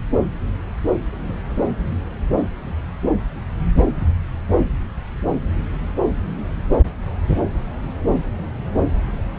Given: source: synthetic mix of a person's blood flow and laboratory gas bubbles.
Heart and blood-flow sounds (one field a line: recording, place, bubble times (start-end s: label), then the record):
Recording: Doppler ultrasound of blood flow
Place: subclavian vein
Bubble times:
no bubbles
From the record:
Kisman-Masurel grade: 000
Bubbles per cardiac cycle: 0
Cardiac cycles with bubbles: 0%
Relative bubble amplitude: no bubbles discernible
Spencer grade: 0 (complete lack of bubble signals)